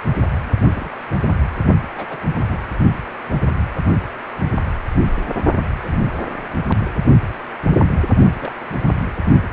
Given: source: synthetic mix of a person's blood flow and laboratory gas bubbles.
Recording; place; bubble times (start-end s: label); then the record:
Doppler ultrasound of blood flow; precordium
0.61-0.90 s: bubbles
1.23-1.34 s: bubbles
1.96-2.23 s: bubbles
2.36-2.60 s: bubbles
5.74-6.04 s: bubbles
8.39-8.52 s: bubbles
8.71-8.80 s: bubbles
From the record:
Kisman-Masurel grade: 121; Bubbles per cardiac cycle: 1 to 2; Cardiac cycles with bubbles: 10 to 50%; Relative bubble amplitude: barely perceptible (0.100 to 0.250); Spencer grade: 2 (many but less than half of the cardiac periods contain bubble signals, singularly or in groups); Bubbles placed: only in the low amplitude regions of the cardiac cycle